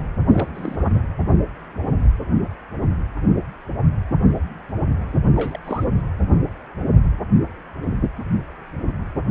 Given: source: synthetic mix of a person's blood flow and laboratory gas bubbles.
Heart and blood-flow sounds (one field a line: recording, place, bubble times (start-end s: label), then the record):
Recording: Doppler ultrasound of blood flow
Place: precordium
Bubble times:
0.28-0.50 s: bubbles
0.54-1.03 s: bubbles
5.33-5.58 s: bubbles
5.64-5.84 s: bubbles
From the record:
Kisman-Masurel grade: 221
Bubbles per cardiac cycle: several, 3 to 8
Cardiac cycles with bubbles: 10 to 50%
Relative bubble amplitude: barely perceptible (0.100 to 0.250)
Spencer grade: 2 (many but less than half of the cardiac periods contain bubble signals, singularly or in groups)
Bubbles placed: anywhere in the cardiac cycle